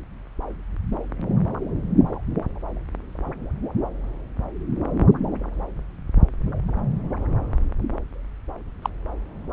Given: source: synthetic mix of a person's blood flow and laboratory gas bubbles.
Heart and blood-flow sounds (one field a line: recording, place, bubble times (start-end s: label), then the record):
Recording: Doppler ultrasound of blood flow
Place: subclavian vein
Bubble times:
8.82-8.89 s: bubbles
From the record:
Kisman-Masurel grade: 112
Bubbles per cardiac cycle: 1 to 2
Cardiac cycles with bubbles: 1 to 10%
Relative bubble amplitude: moderate (0.250 to 0.450)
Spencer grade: 1 (occasional bubble signal discernible with the cardiac motion signal, with majority of cardiac periods free of bubbles)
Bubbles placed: anywhere in the cardiac cycle